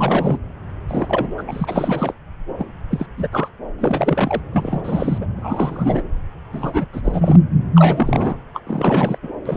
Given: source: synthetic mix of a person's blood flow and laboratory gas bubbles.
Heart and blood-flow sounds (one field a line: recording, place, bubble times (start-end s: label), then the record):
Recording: Doppler ultrasound of blood flow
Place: subclavian vein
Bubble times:
0.00-0.39 s: bubbles
0.88-1.34 s: bubbles
1.38-1.42 s: bubbles
1.47-2.13 s: bubbles
2.58-2.65 s: bubbles
2.90-3.07 s: bubbles
3.17-3.28 s: bubbles
3.31-3.50 s: bubbles
3.78-4.42 s: bubbles
4.52-5.18 s: bubbles
5.21-5.27 s: bubbles
5.37-6.02 s: bubbles
6.53-6.87 s: bubbles
6.93-7.01 s: bubbles
7.04-7.40 s: bubbles
7.75-8.36 s: bubbles
8.54-8.61 s: bubbles
8.67-9.18 s: bubbles
9.22-9.32 s: bubbles
9.46-9.57 s: bubbles
From the record:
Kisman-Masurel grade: 342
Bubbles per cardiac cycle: rolling drumbeat, 9 or more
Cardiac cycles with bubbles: 100%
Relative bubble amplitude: moderate (0.250 to 0.450)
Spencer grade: 3 (all of the cardiac periods contain showers or single bubble signals, but not dominating or overriding the cardiac motion signals)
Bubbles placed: anywhere in the cardiac cycle